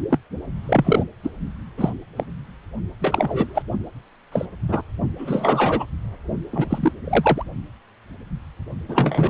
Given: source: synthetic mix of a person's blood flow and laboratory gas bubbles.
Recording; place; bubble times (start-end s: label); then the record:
Doppler ultrasound of blood flow; precordium
0.10-0.18 s: bubbles
0.66-1.04 s: bubbles
1.24-1.30 s: bubbles
1.78-1.93 s: bubbles
2.16-2.24 s: bubbles
3.01-3.62 s: bubbles
4.32-4.45 s: bubbles
4.68-4.81 s: bubbles
5.18-5.86 s: bubbles
6.50-6.92 s: bubbles
7.04-7.43 s: bubbles
8.89-9.30 s: bubbles
From the record:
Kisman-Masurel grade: 232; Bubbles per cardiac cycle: several, 3 to 8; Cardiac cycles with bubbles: 50 to 99%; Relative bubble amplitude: moderate (0.250 to 0.450); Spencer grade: 3 (all of the cardiac periods contain showers or single bubble signals, but not dominating or overriding the cardiac motion signals); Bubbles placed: only in the low amplitude regions of the cardiac cycle